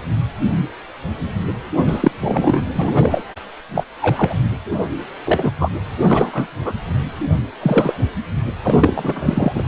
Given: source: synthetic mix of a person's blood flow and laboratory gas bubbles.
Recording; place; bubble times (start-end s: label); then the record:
Doppler ultrasound of blood flow; precordium
1.87-2.11 s: bubbles
2.21-2.62 s: bubbles
2.74-3.22 s: bubbles
3.75-3.83 s: bubbles
4.01-4.34 s: bubbles
4.71-4.77 s: bubbles
5.25-5.51 s: bubbles
5.60-5.69 s: bubbles
6.00-6.50 s: bubbles
6.59-6.73 s: bubbles
7.62-7.93 s: bubbles
8.62-9.63 s: bubbles
From the record:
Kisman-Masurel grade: 233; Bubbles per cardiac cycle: several, 3 to 8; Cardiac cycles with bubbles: 50 to 99%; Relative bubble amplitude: loud (0.450 to 0.775); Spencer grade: 3 (all of the cardiac periods contain showers or single bubble signals, but not dominating or overriding the cardiac motion signals); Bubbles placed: anywhere in the cardiac cycle